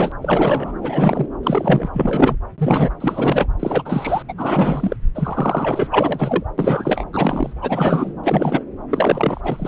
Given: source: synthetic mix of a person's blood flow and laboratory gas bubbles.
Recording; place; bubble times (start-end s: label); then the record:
Doppler ultrasound of blood flow; subclavian vein
0.00-0.12 s: bubbles
0.21-0.73 s: bubbles
0.81-1.27 s: bubbles
1.43-1.88 s: bubbles
1.94-2.36 s: bubbles
2.58-2.90 s: bubbles
3.00-3.46 s: bubbles
3.59-4.22 s: bubbles
4.28-4.33 s: bubbles
4.37-4.96 s: bubbles
5.14-6.43 s: bubbles
6.58-7.04 s: bubbles
7.12-7.53 s: bubbles
7.61-8.13 s: bubbles
8.23-8.62 s: bubbles
8.91-9.68 s: bubbles
From the record:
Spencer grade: 3 (all of the cardiac periods contain showers or single bubble signals, but not dominating or overriding the cardiac motion signals); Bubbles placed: anywhere in the cardiac cycle